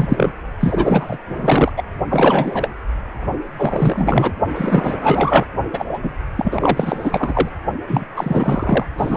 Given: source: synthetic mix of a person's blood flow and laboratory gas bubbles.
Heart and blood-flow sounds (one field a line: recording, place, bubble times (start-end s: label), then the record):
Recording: Doppler ultrasound of blood flow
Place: precordium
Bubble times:
0.00-0.34 s: bubbles
0.59-1.19 s: bubbles
1.26-1.72 s: bubbles
1.76-1.83 s: bubbles
2.09-2.69 s: bubbles
3.57-4.31 s: bubbles
4.54-5.45 s: bubbles
5.72-5.85 s: bubbles
5.89-5.99 s: bubbles
6.03-6.12 s: bubbles
6.36-7.49 s: bubbles
7.87-8.05 s: bubbles
8.16-8.87 s: bubbles
8.98-9.17 s: bubbles
From the record:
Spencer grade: 4 (maximum detectable bubble signal sounding continuously throughout systole and diastole of every cardiac period, and overriding the amplitude of the normal cardiac signals)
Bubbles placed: only in the low amplitude regions of the cardiac cycle